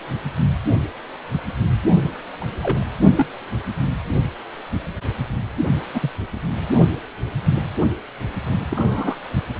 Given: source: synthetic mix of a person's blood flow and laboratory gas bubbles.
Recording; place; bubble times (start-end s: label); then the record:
Doppler ultrasound of blood flow; precordium
2.41-2.45 s: bubbles
2.63-2.83 s: bubbles
3.15-3.27 s: bubbles
5.94-6.11 s: bubbles
8.71-9.16 s: bubbles
From the record:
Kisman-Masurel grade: 122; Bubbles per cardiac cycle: 1 to 2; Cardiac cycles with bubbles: 10 to 50%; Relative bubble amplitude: moderate (0.250 to 0.450); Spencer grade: 2 (many but less than half of the cardiac periods contain bubble signals, singularly or in groups); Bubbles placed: only in the low amplitude regions of the cardiac cycle